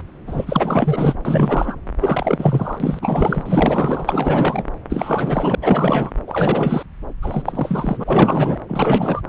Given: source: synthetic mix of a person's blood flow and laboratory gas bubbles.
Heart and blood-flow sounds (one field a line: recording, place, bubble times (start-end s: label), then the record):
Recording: Doppler ultrasound of blood flow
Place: subclavian vein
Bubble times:
0.00-0.03 s: bubbles
0.26-1.15 s: bubbles
1.25-1.77 s: bubbles
2.00-2.99 s: bubbles
3.02-4.63 s: bubbles
4.89-5.55 s: bubbles
5.61-6.12 s: bubbles
6.26-6.83 s: bubbles
7.22-8.59 s: bubbles
8.67-9.21 s: bubbles
From the record:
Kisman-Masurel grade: 444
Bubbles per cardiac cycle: continuous sound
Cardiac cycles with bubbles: 100%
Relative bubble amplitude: maximal (0.775 to 0.999)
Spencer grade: 4 (maximum detectable bubble signal sounding continuously throughout systole and diastole of every cardiac period, and overriding the amplitude of the normal cardiac signals)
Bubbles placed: anywhere in the cardiac cycle